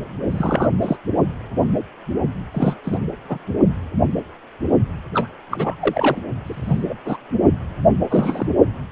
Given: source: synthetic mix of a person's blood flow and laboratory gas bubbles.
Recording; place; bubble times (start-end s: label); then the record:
Doppler ultrasound of blood flow; precordium
0.30-0.70 s: bubbles
0.82-0.97 s: bubbles
2.52-2.74 s: bubbles
2.83-2.98 s: bubbles
3.25-3.43 s: bubbles
5.14-5.29 s: bubbles
5.51-5.76 s: bubbles
5.81-6.20 s: bubbles
6.46-6.82 s: bubbles
6.89-6.95 s: bubbles
7.05-7.17 s: bubbles
8.09-8.49 s: bubbles
From the record:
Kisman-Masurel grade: 232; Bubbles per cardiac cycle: several, 3 to 8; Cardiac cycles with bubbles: 50 to 99%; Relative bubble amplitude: moderate (0.250 to 0.450); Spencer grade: 3 (all of the cardiac periods contain showers or single bubble signals, but not dominating or overriding the cardiac motion signals); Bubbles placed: only in the low amplitude regions of the cardiac cycle